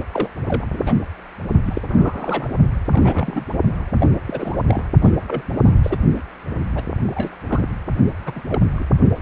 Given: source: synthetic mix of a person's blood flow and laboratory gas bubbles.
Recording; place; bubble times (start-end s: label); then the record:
Doppler ultrasound of blood flow; precordium
0.13-0.29 s: bubbles
0.46-0.66 s: bubbles
0.72-0.94 s: bubbles
1.65-1.82 s: bubbles
1.88-2.48 s: bubbles
2.91-3.45 s: bubbles
3.98-4.08 s: bubbles
4.27-4.57 s: bubbles
4.67-4.83 s: bubbles
5.02-5.12 s: bubbles
5.27-5.42 s: bubbles
5.64-5.80 s: bubbles
5.83-5.98 s: bubbles
6.14-6.22 s: bubbles
6.75-6.83 s: bubbles
7.04-7.35 s: bubbles
7.47-7.69 s: bubbles
8.26-8.33 s: bubbles
8.35-8.42 s: bubbles
8.50-8.61 s: bubbles
8.77-8.86 s: bubbles
From the record:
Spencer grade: 3 (all of the cardiac periods contain showers or single bubble signals, but not dominating or overriding the cardiac motion signals); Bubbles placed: only in the low amplitude regions of the cardiac cycle